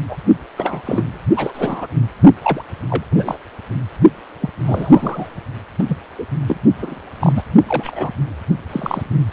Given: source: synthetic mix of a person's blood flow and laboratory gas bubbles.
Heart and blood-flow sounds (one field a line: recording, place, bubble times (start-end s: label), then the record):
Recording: Doppler ultrasound of blood flow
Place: precordium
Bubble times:
0.09-0.17 s: bubbles
0.57-0.82 s: bubbles
0.85-1.19 s: bubbles
1.35-1.87 s: bubbles
2.44-2.63 s: bubbles
2.90-3.04 s: bubbles
3.11-3.37 s: bubbles
4.42-4.50 s: bubbles
4.66-5.39 s: bubbles
5.79-5.84 s: bubbles
5.88-5.97 s: bubbles
6.18-6.25 s: bubbles
6.47-6.56 s: bubbles
6.77-7.00 s: bubbles
7.20-7.33 s: bubbles
7.35-7.42 s: bubbles
7.67-8.12 s: bubbles
8.68-9.03 s: bubbles
From the record:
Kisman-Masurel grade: 242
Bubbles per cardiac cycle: several, 3 to 8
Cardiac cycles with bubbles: 100%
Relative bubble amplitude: moderate (0.250 to 0.450)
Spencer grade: 3 (all of the cardiac periods contain showers or single bubble signals, but not dominating or overriding the cardiac motion signals)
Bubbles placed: only in the low amplitude regions of the cardiac cycle